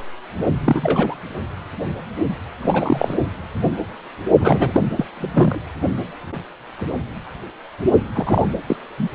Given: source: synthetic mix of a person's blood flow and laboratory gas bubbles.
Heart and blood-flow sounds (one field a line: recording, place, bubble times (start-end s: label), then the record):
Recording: Doppler ultrasound of blood flow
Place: precordium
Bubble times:
0.65-1.15 s: bubbles
2.62-3.15 s: bubbles
4.40-4.71 s: bubbles
4.74-4.80 s: bubbles
4.96-5.05 s: bubbles
5.17-5.62 s: bubbles
8.15-8.55 s: bubbles
8.67-8.77 s: bubbles
8.98-9.09 s: bubbles
From the record:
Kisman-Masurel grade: 233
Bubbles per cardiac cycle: several, 3 to 8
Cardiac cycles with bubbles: 50 to 99%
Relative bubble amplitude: loud (0.450 to 0.775)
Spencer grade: 3 (all of the cardiac periods contain showers or single bubble signals, but not dominating or overriding the cardiac motion signals)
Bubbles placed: only in the low amplitude regions of the cardiac cycle